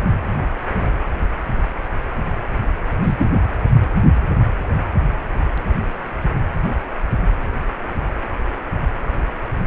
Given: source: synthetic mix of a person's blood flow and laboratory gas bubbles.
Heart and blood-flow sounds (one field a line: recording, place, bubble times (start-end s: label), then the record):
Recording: Doppler ultrasound of blood flow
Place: precordium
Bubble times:
3.02-3.15 s: bubbles
3.18-3.28 s: bubbles
From the record:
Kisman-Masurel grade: 113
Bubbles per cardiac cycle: 1 to 2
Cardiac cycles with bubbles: 1 to 10%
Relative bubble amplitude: loud (0.450 to 0.775)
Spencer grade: 1 (occasional bubble signal discernible with the cardiac motion signal, with majority of cardiac periods free of bubbles)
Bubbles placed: anywhere in the cardiac cycle